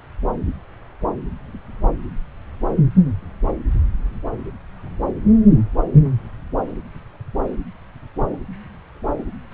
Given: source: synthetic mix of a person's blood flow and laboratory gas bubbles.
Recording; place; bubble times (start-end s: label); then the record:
Doppler ultrasound of blood flow; subclavian vein
9.51-9.54 s: bubbles
From the record:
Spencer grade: 1 (occasional bubble signal discernible with the cardiac motion signal, with majority of cardiac periods free of bubbles); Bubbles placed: anywhere in the cardiac cycle